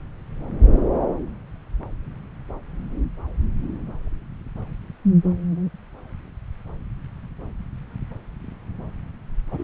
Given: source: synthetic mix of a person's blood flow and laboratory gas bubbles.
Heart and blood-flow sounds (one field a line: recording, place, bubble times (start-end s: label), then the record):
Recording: Doppler ultrasound of blood flow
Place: subclavian vein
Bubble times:
9.51-9.64 s: bubbles
From the record:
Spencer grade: 1 (occasional bubble signal discernible with the cardiac motion signal, with majority of cardiac periods free of bubbles)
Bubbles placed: anywhere in the cardiac cycle